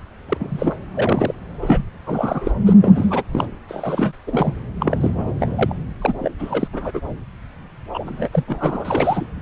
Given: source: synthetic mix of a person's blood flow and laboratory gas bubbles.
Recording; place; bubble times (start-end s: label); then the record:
Doppler ultrasound of blood flow; subclavian vein
0.29-0.37 s: bubbles
0.40-0.77 s: bubbles
0.94-1.33 s: bubbles
1.61-1.84 s: bubbles
2.06-2.53 s: bubbles
2.65-2.73 s: bubbles
2.81-3.23 s: bubbles
3.33-3.46 s: bubbles
3.68-4.12 s: bubbles
4.27-4.54 s: bubbles
4.79-5.74 s: bubbles
6.00-6.14 s: bubbles
6.19-6.32 s: bubbles
6.39-6.68 s: bubbles
6.73-6.91 s: bubbles
6.94-7.00 s: bubbles
7.93-8.29 s: bubbles
8.32-8.43 s: bubbles
8.47-9.27 s: bubbles
From the record:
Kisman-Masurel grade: 342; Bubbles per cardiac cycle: rolling drumbeat, 9 or more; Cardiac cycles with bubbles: 100%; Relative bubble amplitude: moderate (0.250 to 0.450); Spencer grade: 3 (all of the cardiac periods contain showers or single bubble signals, but not dominating or overriding the cardiac motion signals); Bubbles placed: anywhere in the cardiac cycle